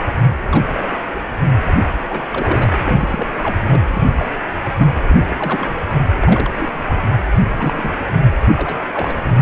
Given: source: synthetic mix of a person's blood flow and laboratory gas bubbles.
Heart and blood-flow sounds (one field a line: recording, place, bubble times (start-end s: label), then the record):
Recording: Doppler ultrasound of blood flow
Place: precordium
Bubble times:
0.00-0.07 s: bubbles
0.49-0.89 s: bubbles
1.14-1.19 s: bubbles
2.10-2.28 s: bubbles
2.31-2.77 s: bubbles
2.85-3.31 s: bubbles
3.43-3.58 s: bubbles
3.69-3.80 s: bubbles
3.93-4.03 s: bubbles
4.18-4.27 s: bubbles
4.79-4.88 s: bubbles
5.08-5.22 s: bubbles
5.28-5.76 s: bubbles
6.22-6.51 s: bubbles
6.57-6.69 s: bubbles
6.88-6.94 s: bubbles
7.55-7.95 s: bubbles
8.56-8.79 s: bubbles
8.92-9.24 s: bubbles
9.35-9.42 s: bubbles
From the record:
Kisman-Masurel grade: 242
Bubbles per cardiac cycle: several, 3 to 8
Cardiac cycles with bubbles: 100%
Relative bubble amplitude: moderate (0.250 to 0.450)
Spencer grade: 3 (all of the cardiac periods contain showers or single bubble signals, but not dominating or overriding the cardiac motion signals)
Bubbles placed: anywhere in the cardiac cycle